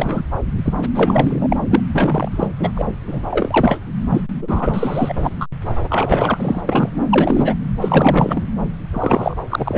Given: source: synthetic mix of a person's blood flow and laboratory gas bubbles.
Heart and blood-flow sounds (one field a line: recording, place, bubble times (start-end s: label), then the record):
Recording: Doppler ultrasound of blood flow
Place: subclavian vein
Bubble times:
0.00-0.23 s: bubbles
0.65-0.73 s: bubbles
0.94-1.47 s: bubbles
1.50-1.56 s: bubbles
1.70-1.80 s: bubbles
1.93-2.47 s: bubbles
2.59-2.71 s: bubbles
2.75-2.85 s: bubbles
3.06-3.77 s: bubbles
4.09-4.24 s: bubbles
4.42-5.13 s: bubbles
5.22-5.47 s: bubbles
5.89-6.61 s: bubbles
6.67-6.89 s: bubbles
7.09-7.55 s: bubbles
7.81-8.41 s: bubbles
8.93-9.36 s: bubbles
9.49-9.78 s: bubbles
From the record:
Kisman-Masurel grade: 343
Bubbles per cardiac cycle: rolling drumbeat, 9 or more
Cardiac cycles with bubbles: 100%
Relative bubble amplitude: loud (0.450 to 0.775)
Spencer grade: 3 (all of the cardiac periods contain showers or single bubble signals, but not dominating or overriding the cardiac motion signals)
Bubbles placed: anywhere in the cardiac cycle